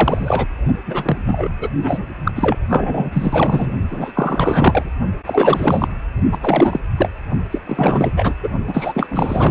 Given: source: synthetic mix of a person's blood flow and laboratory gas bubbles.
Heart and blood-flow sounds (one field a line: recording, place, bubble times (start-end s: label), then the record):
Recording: Doppler ultrasound of blood flow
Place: precordium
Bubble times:
0.00-0.46 s: bubbles
0.86-1.17 s: bubbles
1.25-1.48 s: bubbles
1.60-1.69 s: bubbles
1.81-2.06 s: bubbles
2.25-2.31 s: bubbles
2.35-2.56 s: bubbles
2.69-3.71 s: bubbles
3.90-4.91 s: bubbles
5.25-5.88 s: bubbles
6.31-6.38 s: bubbles
6.40-6.80 s: bubbles
6.96-7.09 s: bubbles
7.51-7.59 s: bubbles
7.66-8.35 s: bubbles
8.43-8.49 s: bubbles
8.67-9.07 s: bubbles
9.10-9.51 s: bubbles
From the record:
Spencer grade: 4 (maximum detectable bubble signal sounding continuously throughout systole and diastole of every cardiac period, and overriding the amplitude of the normal cardiac signals)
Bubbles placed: only in the low amplitude regions of the cardiac cycle